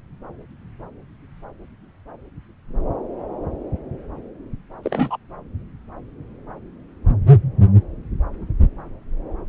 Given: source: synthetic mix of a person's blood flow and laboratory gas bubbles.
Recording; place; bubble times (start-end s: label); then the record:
Doppler ultrasound of blood flow; subclavian vein
4.83-5.17 s: bubbles
From the record:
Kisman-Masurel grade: 112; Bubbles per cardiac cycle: 1 to 2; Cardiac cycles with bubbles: 1 to 10%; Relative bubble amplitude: moderate (0.250 to 0.450); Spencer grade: 1 (occasional bubble signal discernible with the cardiac motion signal, with majority of cardiac periods free of bubbles); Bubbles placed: anywhere in the cardiac cycle